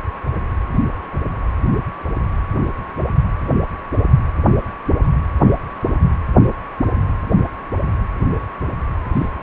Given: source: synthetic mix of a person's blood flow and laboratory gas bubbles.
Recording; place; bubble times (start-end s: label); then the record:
Doppler ultrasound of blood flow; precordium
9.13-9.29 s: bubbles
From the record:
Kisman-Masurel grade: 111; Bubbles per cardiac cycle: 1 to 2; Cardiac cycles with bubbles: 1 to 10%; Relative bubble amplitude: barely perceptible (0.100 to 0.250); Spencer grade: 1 (occasional bubble signal discernible with the cardiac motion signal, with majority of cardiac periods free of bubbles); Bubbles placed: anywhere in the cardiac cycle